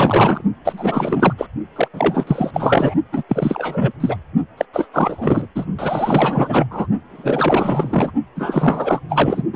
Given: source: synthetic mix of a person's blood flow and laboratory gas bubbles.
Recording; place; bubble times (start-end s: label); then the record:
Doppler ultrasound of blood flow; precordium
0.00-0.42 s: bubbles
0.65-1.33 s: bubbles
1.38-1.46 s: bubbles
1.75-1.88 s: bubbles
1.93-2.51 s: bubbles
2.54-2.94 s: bubbles
3.12-3.23 s: bubbles
3.29-3.92 s: bubbles
4.00-4.17 s: bubbles
4.57-4.65 s: bubbles
4.73-4.88 s: bubbles
4.93-5.46 s: bubbles
5.55-5.65 s: bubbles
5.79-6.68 s: bubbles
6.70-6.87 s: bubbles
7.09-8.12 s: bubbles
8.35-8.99 s: bubbles
9.09-9.42 s: bubbles
9.53-9.56 s: bubbles
From the record:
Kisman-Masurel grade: 444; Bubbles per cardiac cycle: continuous sound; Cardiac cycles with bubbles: 100%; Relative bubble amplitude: maximal (0.775 to 0.999); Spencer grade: 4 (maximum detectable bubble signal sounding continuously throughout systole and diastole of every cardiac period, and overriding the amplitude of the normal cardiac signals); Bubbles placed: only in the low amplitude regions of the cardiac cycle